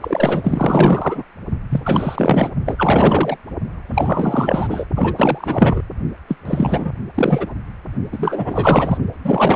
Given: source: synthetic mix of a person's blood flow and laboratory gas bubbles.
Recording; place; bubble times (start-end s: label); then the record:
Doppler ultrasound of blood flow; precordium
0.01-1.24 s: bubbles
1.70-2.50 s: bubbles
2.65-3.36 s: bubbles
3.88-4.87 s: bubbles
4.96-5.13 s: bubbles
5.16-5.82 s: bubbles
6.28-6.36 s: bubbles
6.45-6.94 s: bubbles
7.14-7.54 s: bubbles
8.12-8.97 s: bubbles
9.24-9.56 s: bubbles
From the record:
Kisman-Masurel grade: 444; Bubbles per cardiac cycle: continuous sound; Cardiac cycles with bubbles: 100%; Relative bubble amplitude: maximal (0.775 to 0.999); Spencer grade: 4 (maximum detectable bubble signal sounding continuously throughout systole and diastole of every cardiac period, and overriding the amplitude of the normal cardiac signals); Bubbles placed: only in the low amplitude regions of the cardiac cycle